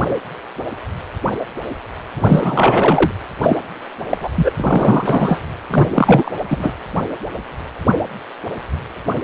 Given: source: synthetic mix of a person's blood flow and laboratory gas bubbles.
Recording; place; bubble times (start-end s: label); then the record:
Doppler ultrasound of blood flow; precordium
2.16-3.12 s: bubbles
3.41-3.57 s: bubbles
4.11-4.18 s: bubbles
4.21-4.29 s: bubbles
4.35-4.51 s: bubbles
4.59-5.40 s: bubbles
5.70-6.43 s: bubbles
6.48-6.74 s: bubbles
From the record:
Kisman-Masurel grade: 233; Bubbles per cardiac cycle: several, 3 to 8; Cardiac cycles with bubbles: 50 to 99%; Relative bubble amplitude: loud (0.450 to 0.775); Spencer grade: 3 (all of the cardiac periods contain showers or single bubble signals, but not dominating or overriding the cardiac motion signals); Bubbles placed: anywhere in the cardiac cycle